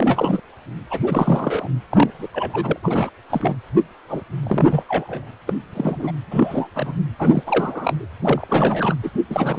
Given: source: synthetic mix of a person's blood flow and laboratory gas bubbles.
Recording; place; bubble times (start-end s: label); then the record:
Doppler ultrasound of blood flow; precordium
0.00-0.40 s: bubbles
0.90-1.69 s: bubbles
1.90-2.10 s: bubbles
2.19-2.28 s: bubbles
2.32-2.80 s: bubbles
2.82-3.09 s: bubbles
3.29-3.56 s: bubbles
4.08-4.22 s: bubbles
4.43-4.83 s: bubbles
4.88-5.32 s: bubbles
5.46-5.55 s: bubbles
5.73-6.12 s: bubbles
6.31-6.70 s: bubbles
6.75-7.00 s: bubbles
7.19-7.44 s: bubbles
7.46-8.07 s: bubbles
8.21-8.95 s: bubbles
9.03-9.09 s: bubbles
9.29-9.59 s: bubbles
From the record:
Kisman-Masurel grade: 342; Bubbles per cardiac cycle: rolling drumbeat, 9 or more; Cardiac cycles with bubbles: 100%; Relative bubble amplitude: moderate (0.250 to 0.450); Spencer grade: 3 (all of the cardiac periods contain showers or single bubble signals, but not dominating or overriding the cardiac motion signals); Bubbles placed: anywhere in the cardiac cycle